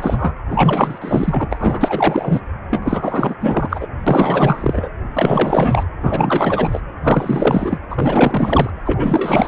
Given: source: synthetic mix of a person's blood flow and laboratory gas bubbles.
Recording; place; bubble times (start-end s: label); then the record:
Doppler ultrasound of blood flow; precordium
0.00-0.35 s: bubbles
0.48-0.99 s: bubbles
1.01-1.48 s: bubbles
1.52-2.41 s: bubbles
2.70-3.35 s: bubbles
3.41-3.87 s: bubbles
4.07-4.90 s: bubbles
5.14-5.83 s: bubbles
6.00-6.81 s: bubbles
7.03-7.79 s: bubbles
7.90-8.70 s: bubbles
8.85-9.48 s: bubbles
From the record:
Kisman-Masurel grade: 444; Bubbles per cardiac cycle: continuous sound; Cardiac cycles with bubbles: 100%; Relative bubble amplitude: maximal (0.775 to 0.999); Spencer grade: 4 (maximum detectable bubble signal sounding continuously throughout systole and diastole of every cardiac period, and overriding the amplitude of the normal cardiac signals); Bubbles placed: anywhere in the cardiac cycle